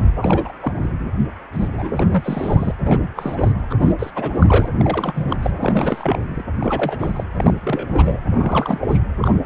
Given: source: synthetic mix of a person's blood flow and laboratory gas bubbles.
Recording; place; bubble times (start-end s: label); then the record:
Doppler ultrasound of blood flow; precordium
0.00-0.10 s: bubbles
0.18-0.53 s: bubbles
0.60-0.73 s: bubbles
0.79-0.92 s: bubbles
1.53-2.72 s: bubbles
2.78-3.08 s: bubbles
3.16-3.52 s: bubbles
3.70-3.75 s: bubbles
3.79-3.92 s: bubbles
3.98-4.10 s: bubbles
4.15-4.68 s: bubbles
4.73-5.50 s: bubbles
5.59-6.43 s: bubbles
6.60-7.24 s: bubbles
7.38-8.21 s: bubbles
8.29-8.99 s: bubbles
9.21-9.39 s: bubbles
From the record:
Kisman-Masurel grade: 342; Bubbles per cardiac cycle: rolling drumbeat, 9 or more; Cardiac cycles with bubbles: 100%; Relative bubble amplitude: moderate (0.250 to 0.450); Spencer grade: 3 (all of the cardiac periods contain showers or single bubble signals, but not dominating or overriding the cardiac motion signals); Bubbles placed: anywhere in the cardiac cycle